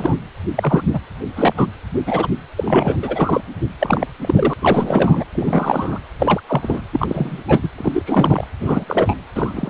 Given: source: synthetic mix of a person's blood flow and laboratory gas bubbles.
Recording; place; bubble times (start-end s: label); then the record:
Doppler ultrasound of blood flow; precordium
0.00-0.15 s: bubbles
0.55-0.83 s: bubbles
0.93-0.99 s: bubbles
1.35-1.53 s: bubbles
1.56-1.67 s: bubbles
2.06-2.28 s: bubbles
2.56-2.98 s: bubbles
3.02-3.41 s: bubbles
3.79-4.06 s: bubbles
4.21-4.54 s: bubbles
4.61-5.24 s: bubbles
5.33-5.99 s: bubbles
6.19-6.41 s: bubbles
6.48-6.82 s: bubbles
6.92-7.42 s: bubbles
7.46-7.69 s: bubbles
7.78-8.03 s: bubbles
8.06-8.45 s: bubbles
8.59-8.85 s: bubbles
8.87-9.14 s: bubbles
9.35-9.70 s: bubbles
From the record:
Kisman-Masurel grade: 243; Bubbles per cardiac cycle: several, 3 to 8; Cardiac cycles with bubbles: 100%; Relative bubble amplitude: loud (0.450 to 0.775); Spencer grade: 3 (all of the cardiac periods contain showers or single bubble signals, but not dominating or overriding the cardiac motion signals); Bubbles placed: anywhere in the cardiac cycle